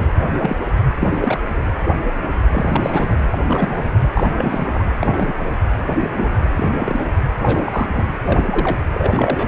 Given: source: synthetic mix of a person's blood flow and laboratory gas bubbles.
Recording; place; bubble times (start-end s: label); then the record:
Doppler ultrasound of blood flow; precordium
0.00-0.06 s: bubbles
0.13-0.29 s: bubbles
0.34-0.56 s: bubbles
0.99-1.39 s: bubbles
1.56-1.60 s: bubbles
2.52-3.15 s: bubbles
3.31-3.38 s: bubbles
3.46-3.90 s: bubbles
4.13-4.33 s: bubbles
4.38-4.86 s: bubbles
4.99-5.33 s: bubbles
5.37-5.45 s: bubbles
5.85-5.96 s: bubbles
6.00-6.13 s: bubbles
6.18-6.28 s: bubbles
6.57-6.71 s: bubbles
6.79-7.06 s: bubbles
7.42-8.07 s: bubbles
8.23-8.77 s: bubbles
8.93-9.48 s: bubbles
From the record:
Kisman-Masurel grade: 232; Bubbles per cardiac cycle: several, 3 to 8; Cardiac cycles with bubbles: 50 to 99%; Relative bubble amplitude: moderate (0.250 to 0.450); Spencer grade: 3 (all of the cardiac periods contain showers or single bubble signals, but not dominating or overriding the cardiac motion signals); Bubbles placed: anywhere in the cardiac cycle